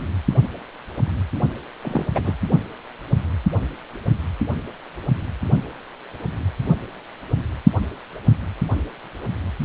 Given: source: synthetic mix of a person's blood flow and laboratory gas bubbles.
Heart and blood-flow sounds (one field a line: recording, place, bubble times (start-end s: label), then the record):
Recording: Doppler ultrasound of blood flow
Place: precordium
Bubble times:
1.82-2.06 s: bubbles
2.15-2.35 s: bubbles
From the record:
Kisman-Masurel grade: 221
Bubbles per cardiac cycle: several, 3 to 8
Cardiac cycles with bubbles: 10 to 50%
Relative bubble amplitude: barely perceptible (0.100 to 0.250)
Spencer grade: 2 (many but less than half of the cardiac periods contain bubble signals, singularly or in groups)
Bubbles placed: only in the low amplitude regions of the cardiac cycle